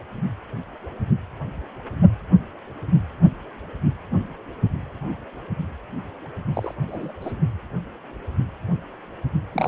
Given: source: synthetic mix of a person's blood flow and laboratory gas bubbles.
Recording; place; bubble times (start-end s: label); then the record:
Doppler ultrasound of blood flow; precordium
6.54-6.74 s: bubbles
6.88-7.12 s: bubbles
7.21-7.33 s: bubbles
9.53-9.68 s: bubbles
From the record:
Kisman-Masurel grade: 221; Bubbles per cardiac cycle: several, 3 to 8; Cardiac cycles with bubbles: 10 to 50%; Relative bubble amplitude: barely perceptible (0.100 to 0.250); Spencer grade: 2 (many but less than half of the cardiac periods contain bubble signals, singularly or in groups); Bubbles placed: only in the low amplitude regions of the cardiac cycle